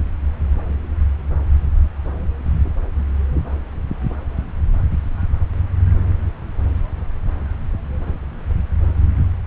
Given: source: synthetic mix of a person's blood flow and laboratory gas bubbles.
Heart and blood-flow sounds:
Doppler ultrasound of blood flow; subclavian vein
3.33-3.43 s: bubbles
From the record:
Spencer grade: 2 (many but less than half of the cardiac periods contain bubble signals, singularly or in groups); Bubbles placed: anywhere in the cardiac cycle

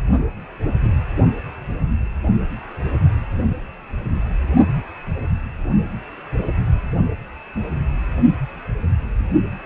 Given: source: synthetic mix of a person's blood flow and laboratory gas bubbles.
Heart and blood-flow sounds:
Doppler ultrasound of blood flow; precordium
no bubbles
From the record:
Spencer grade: 0 (complete lack of bubble signals)

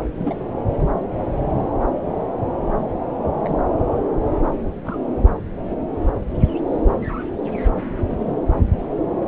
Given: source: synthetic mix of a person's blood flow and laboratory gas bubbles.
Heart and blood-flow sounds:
Doppler ultrasound of blood flow; subclavian vein
0.18-0.45 s: bubbles
3.41-3.58 s: bubbles
3.74-3.76 s: bubbles
4.83-4.98 s: bubbles
8.08-8.37 s: bubbles
From the record:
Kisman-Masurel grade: 121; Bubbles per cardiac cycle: 1 to 2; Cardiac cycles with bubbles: 10 to 50%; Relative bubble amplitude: barely perceptible (0.100 to 0.250); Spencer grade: 2 (many but less than half of the cardiac periods contain bubble signals, singularly or in groups); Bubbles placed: anywhere in the cardiac cycle

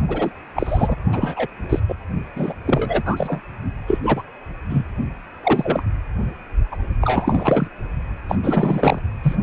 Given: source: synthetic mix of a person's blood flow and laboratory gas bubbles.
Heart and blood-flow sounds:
Doppler ultrasound of blood flow; precordium
0.08-0.31 s: bubbles
0.56-0.96 s: bubbles
1.12-1.46 s: bubbles
1.69-1.80 s: bubbles
1.89-1.94 s: bubbles
2.36-2.54 s: bubbles
2.65-3.03 s: bubbles
3.05-3.40 s: bubbles
3.86-3.98 s: bubbles
4.03-4.23 s: bubbles
4.69-4.83 s: bubbles
5.43-5.83 s: bubbles
6.71-6.77 s: bubbles
7.02-7.68 s: bubbles
8.28-8.36 s: bubbles
8.42-8.99 s: bubbles
9.23-9.38 s: bubbles
From the record:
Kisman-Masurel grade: 243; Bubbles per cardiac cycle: several, 3 to 8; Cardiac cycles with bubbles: 100%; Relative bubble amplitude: loud (0.450 to 0.775); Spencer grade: 3 (all of the cardiac periods contain showers or single bubble signals, but not dominating or overriding the cardiac motion signals); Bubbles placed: only in the low amplitude regions of the cardiac cycle

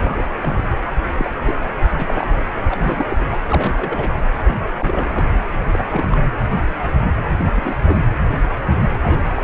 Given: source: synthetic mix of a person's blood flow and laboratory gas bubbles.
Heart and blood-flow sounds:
Doppler ultrasound of blood flow; precordium
0.00-0.29 s: bubbles
0.41-0.68 s: bubbles
0.72-0.76 s: bubbles
1.18-1.30 s: bubbles
1.45-1.56 s: bubbles
1.93-2.27 s: bubbles
2.34-2.45 s: bubbles
2.70-3.26 s: bubbles
3.48-4.10 s: bubbles
4.43-4.60 s: bubbles
4.65-4.70 s: bubbles
4.77-5.25 s: bubbles
5.72-5.87 s: bubbles
5.89-6.17 s: bubbles
7.39-7.45 s: bubbles
7.56-7.76 s: bubbles
7.84-7.97 s: bubbles
9.03-9.44 s: bubbles
From the record:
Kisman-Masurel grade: 232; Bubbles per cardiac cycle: several, 3 to 8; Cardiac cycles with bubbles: 50 to 99%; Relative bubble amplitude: moderate (0.250 to 0.450); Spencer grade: 3 (all of the cardiac periods contain showers or single bubble signals, but not dominating or overriding the cardiac motion signals); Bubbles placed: anywhere in the cardiac cycle

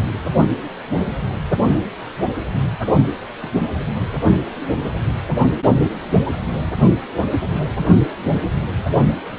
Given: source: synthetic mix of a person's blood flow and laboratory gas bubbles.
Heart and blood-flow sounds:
Doppler ultrasound of blood flow; precordium
3.42-3.50 s: bubbles
From the record:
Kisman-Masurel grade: 112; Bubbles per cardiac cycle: 1 to 2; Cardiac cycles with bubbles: 1 to 10%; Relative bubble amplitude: moderate (0.250 to 0.450); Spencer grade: 1 (occasional bubble signal discernible with the cardiac motion signal, with majority of cardiac periods free of bubbles); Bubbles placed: only in the low amplitude regions of the cardiac cycle

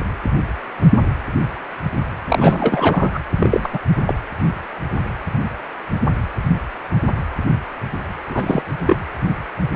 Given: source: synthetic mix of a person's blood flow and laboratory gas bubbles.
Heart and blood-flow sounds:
Doppler ultrasound of blood flow; precordium
2.21-3.10 s: bubbles
3.13-3.19 s: bubbles
3.38-3.69 s: bubbles
3.72-3.78 s: bubbles
4.06-4.14 s: bubbles
8.29-8.62 s: bubbles
8.80-8.96 s: bubbles
From the record:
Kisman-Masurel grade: 223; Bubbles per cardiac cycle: several, 3 to 8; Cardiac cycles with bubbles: 10 to 50%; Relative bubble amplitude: loud (0.450 to 0.775); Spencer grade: 2 (many but less than half of the cardiac periods contain bubble signals, singularly or in groups); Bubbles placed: anywhere in the cardiac cycle

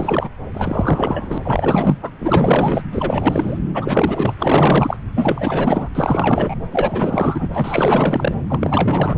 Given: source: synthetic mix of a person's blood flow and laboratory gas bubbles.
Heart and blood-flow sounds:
Doppler ultrasound of blood flow; subclavian vein
0.00-0.29 s: bubbles
0.54-1.38 s: bubbles
1.44-1.98 s: bubbles
2.01-2.10 s: bubbles
2.18-2.81 s: bubbles
2.92-3.58 s: bubbles
3.74-4.97 s: bubbles
5.16-5.89 s: bubbles
5.95-6.55 s: bubbles
6.71-7.48 s: bubbles
7.53-8.35 s: bubbles
8.48-9.15 s: bubbles
From the record:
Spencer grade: 4 (maximum detectable bubble signal sounding continuously throughout systole and diastole of every cardiac period, and overriding the amplitude of the normal cardiac signals); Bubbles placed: anywhere in the cardiac cycle

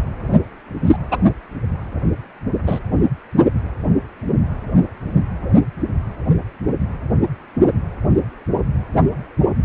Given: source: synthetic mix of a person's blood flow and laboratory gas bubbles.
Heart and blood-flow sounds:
Doppler ultrasound of blood flow; precordium
0.85-0.96 s: bubbles
1.11-1.18 s: bubbles
2.67-2.79 s: bubbles
From the record:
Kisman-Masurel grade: 123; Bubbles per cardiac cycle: 1 to 2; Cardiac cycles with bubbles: 10 to 50%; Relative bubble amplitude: loud (0.450 to 0.775); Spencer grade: 2 (many but less than half of the cardiac periods contain bubble signals, singularly or in groups); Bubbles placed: only in the low amplitude regions of the cardiac cycle

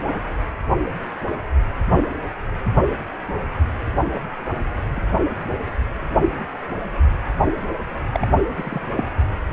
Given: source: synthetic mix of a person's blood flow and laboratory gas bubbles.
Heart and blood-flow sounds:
Doppler ultrasound of blood flow; precordium
4.12-4.20 s: bubbles
4.96-5.01 s: bubbles
8.12-8.27 s: bubbles
8.57-8.80 s: bubbles
8.95-9.04 s: bubbles
From the record:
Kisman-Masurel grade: 122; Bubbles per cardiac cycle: 1 to 2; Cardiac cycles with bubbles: 10 to 50%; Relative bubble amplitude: moderate (0.250 to 0.450); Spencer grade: 2 (many but less than half of the cardiac periods contain bubble signals, singularly or in groups); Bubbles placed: anywhere in the cardiac cycle

